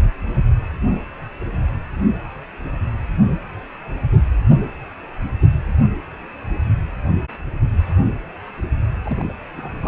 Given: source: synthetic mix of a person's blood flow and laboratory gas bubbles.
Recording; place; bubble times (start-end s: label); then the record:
Doppler ultrasound of blood flow; precordium
9.05-9.33 s: bubbles
9.54-9.88 s: bubbles
From the record:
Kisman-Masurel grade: 211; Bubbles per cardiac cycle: several, 3 to 8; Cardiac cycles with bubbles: 1 to 10%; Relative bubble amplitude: barely perceptible (0.100 to 0.250); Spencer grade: 1 (occasional bubble signal discernible with the cardiac motion signal, with majority of cardiac periods free of bubbles); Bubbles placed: anywhere in the cardiac cycle